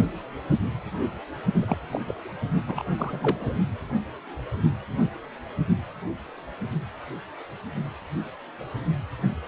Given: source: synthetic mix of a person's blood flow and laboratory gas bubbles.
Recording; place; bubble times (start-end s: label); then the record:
Doppler ultrasound of blood flow; precordium
1.54-1.78 s: bubbles
1.90-2.00 s: bubbles
2.06-2.14 s: bubbles
2.67-2.82 s: bubbles
2.96-3.55 s: bubbles
From the record:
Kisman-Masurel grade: 221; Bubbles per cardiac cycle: several, 3 to 8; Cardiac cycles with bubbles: 10 to 50%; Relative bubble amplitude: barely perceptible (0.100 to 0.250); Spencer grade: 2 (many but less than half of the cardiac periods contain bubble signals, singularly or in groups); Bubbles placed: only in the low amplitude regions of the cardiac cycle